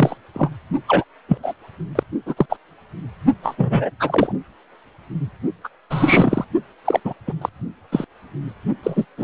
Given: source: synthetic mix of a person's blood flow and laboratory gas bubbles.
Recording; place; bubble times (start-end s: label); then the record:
Doppler ultrasound of blood flow; precordium
0.00-0.18 s: bubbles
0.34-0.49 s: bubbles
0.87-1.04 s: bubbles
1.28-1.38 s: bubbles
1.42-1.54 s: bubbles
1.95-2.03 s: bubbles
2.26-2.46 s: bubbles
2.49-2.56 s: bubbles
3.42-3.90 s: bubbles
3.99-4.32 s: bubbles
5.63-5.69 s: bubbles
5.90-6.45 s: bubbles
6.85-7.00 s: bubbles
7.04-7.13 s: bubbles
7.27-7.34 s: bubbles
7.41-7.49 s: bubbles
7.91-8.04 s: bubbles
8.83-9.05 s: bubbles
9.17-9.24 s: bubbles
From the record:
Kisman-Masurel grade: 243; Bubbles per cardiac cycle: several, 3 to 8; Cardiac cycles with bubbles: 100%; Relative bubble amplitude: loud (0.450 to 0.775); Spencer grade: 3 (all of the cardiac periods contain showers or single bubble signals, but not dominating or overriding the cardiac motion signals); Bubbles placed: only in the low amplitude regions of the cardiac cycle